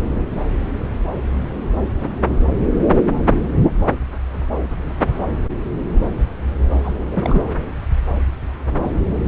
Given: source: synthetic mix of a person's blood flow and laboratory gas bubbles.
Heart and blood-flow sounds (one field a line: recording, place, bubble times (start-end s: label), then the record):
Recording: Doppler ultrasound of blood flow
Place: subclavian vein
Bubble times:
6.84-6.92 s: bubbles
7.11-7.42 s: bubbles
From the record:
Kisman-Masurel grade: 212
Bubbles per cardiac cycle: several, 3 to 8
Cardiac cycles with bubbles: 1 to 10%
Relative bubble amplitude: moderate (0.250 to 0.450)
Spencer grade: 1 (occasional bubble signal discernible with the cardiac motion signal, with majority of cardiac periods free of bubbles)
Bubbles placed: anywhere in the cardiac cycle